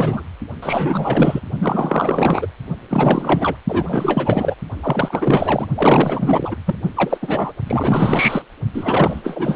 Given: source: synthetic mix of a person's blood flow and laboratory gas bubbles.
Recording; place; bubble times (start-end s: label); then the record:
Doppler ultrasound of blood flow; precordium
0.00-0.23 s: bubbles
0.62-1.40 s: bubbles
1.59-2.47 s: bubbles
2.90-3.56 s: bubbles
3.68-4.55 s: bubbles
4.82-5.67 s: bubbles
5.74-6.56 s: bubbles
6.65-6.75 s: bubbles
6.96-7.17 s: bubbles
7.21-7.52 s: bubbles
7.66-8.42 s: bubbles
8.73-9.56 s: bubbles
From the record:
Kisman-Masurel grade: 444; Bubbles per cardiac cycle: continuous sound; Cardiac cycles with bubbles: 100%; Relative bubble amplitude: maximal (0.775 to 0.999); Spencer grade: 4 (maximum detectable bubble signal sounding continuously throughout systole and diastole of every cardiac period, and overriding the amplitude of the normal cardiac signals); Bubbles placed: only in the low amplitude regions of the cardiac cycle